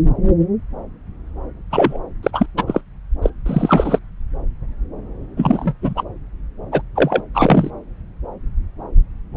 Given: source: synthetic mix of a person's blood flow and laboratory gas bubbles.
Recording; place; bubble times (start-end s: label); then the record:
Doppler ultrasound of blood flow; subclavian vein
1.71-1.99 s: bubbles
2.23-2.46 s: bubbles
2.57-2.64 s: bubbles
2.67-2.81 s: bubbles
3.22-3.30 s: bubbles
3.46-3.99 s: bubbles
5.37-5.74 s: bubbles
5.82-6.03 s: bubbles
6.71-6.82 s: bubbles
6.96-7.21 s: bubbles
7.34-7.71 s: bubbles
From the record:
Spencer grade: 2 (many but less than half of the cardiac periods contain bubble signals, singularly or in groups); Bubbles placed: anywhere in the cardiac cycle